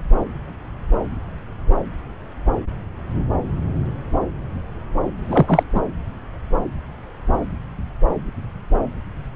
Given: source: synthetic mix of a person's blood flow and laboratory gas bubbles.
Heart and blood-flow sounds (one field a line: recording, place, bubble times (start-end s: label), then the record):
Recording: Doppler ultrasound of blood flow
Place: subclavian vein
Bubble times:
5.18-5.63 s: bubbles
5.74-5.81 s: bubbles
From the record:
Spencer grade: 1 (occasional bubble signal discernible with the cardiac motion signal, with majority of cardiac periods free of bubbles)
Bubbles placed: anywhere in the cardiac cycle